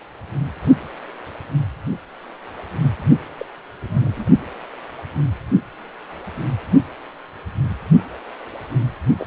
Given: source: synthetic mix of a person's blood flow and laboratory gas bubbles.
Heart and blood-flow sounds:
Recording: Doppler ultrasound of blood flow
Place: precordium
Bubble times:
3.38-3.46 s: bubbles
3.81-4.29 s: bubbles
9.16-9.27 s: bubbles
From the record:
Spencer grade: 2 (many but less than half of the cardiac periods contain bubble signals, singularly or in groups)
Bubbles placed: only in the low amplitude regions of the cardiac cycle

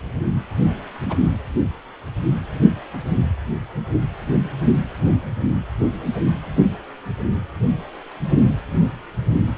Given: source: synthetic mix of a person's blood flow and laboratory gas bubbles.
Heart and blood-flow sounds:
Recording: Doppler ultrasound of blood flow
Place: precordium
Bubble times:
1.00-1.17 s: bubbles
From the record:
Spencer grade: 1 (occasional bubble signal discernible with the cardiac motion signal, with majority of cardiac periods free of bubbles)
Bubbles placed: anywhere in the cardiac cycle

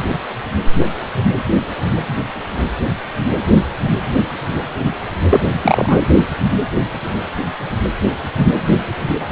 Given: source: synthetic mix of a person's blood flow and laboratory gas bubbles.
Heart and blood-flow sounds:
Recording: Doppler ultrasound of blood flow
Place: precordium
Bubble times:
5.30-5.55 s: bubbles
5.62-6.04 s: bubbles
From the record:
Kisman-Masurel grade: 213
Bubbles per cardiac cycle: several, 3 to 8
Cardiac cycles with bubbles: 1 to 10%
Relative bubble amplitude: loud (0.450 to 0.775)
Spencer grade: 1 (occasional bubble signal discernible with the cardiac motion signal, with majority of cardiac periods free of bubbles)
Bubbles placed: anywhere in the cardiac cycle

